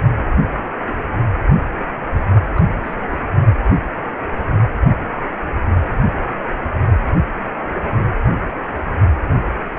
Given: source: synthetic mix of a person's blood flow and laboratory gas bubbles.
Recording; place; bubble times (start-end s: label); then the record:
Doppler ultrasound of blood flow; precordium
2.26-2.40 s: bubbles
2.55-2.62 s: bubbles
2.83-2.94 s: bubbles
3.11-3.19 s: bubbles
From the record:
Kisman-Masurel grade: 211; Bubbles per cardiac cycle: several, 3 to 8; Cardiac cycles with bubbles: 1 to 10%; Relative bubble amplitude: barely perceptible (0.100 to 0.250); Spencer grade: 1 (occasional bubble signal discernible with the cardiac motion signal, with majority of cardiac periods free of bubbles); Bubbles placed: only in the low amplitude regions of the cardiac cycle